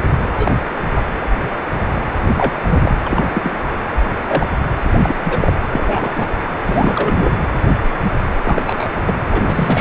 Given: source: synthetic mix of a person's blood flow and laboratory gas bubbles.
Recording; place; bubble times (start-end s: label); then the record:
Doppler ultrasound of blood flow; precordium
0.04-0.12 s: bubbles
0.37-0.51 s: bubbles
0.85-1.04 s: bubbles
2.37-2.54 s: bubbles
2.70-2.92 s: bubbles
3.04-3.31 s: bubbles
3.33-3.54 s: bubbles
3.96-4.03 s: bubbles
4.28-4.47 s: bubbles
5.03-5.15 s: bubbles
5.24-5.53 s: bubbles
5.72-6.11 s: bubbles
6.14-6.33 s: bubbles
6.66-7.34 s: bubbles
8.44-8.62 s: bubbles
8.65-9.02 s: bubbles
9.05-9.13 s: bubbles
9.29-9.81 s: bubbles
From the record:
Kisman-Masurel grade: 232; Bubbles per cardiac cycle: several, 3 to 8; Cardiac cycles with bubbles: 50 to 99%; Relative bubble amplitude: moderate (0.250 to 0.450); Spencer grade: 3 (all of the cardiac periods contain showers or single bubble signals, but not dominating or overriding the cardiac motion signals); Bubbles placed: anywhere in the cardiac cycle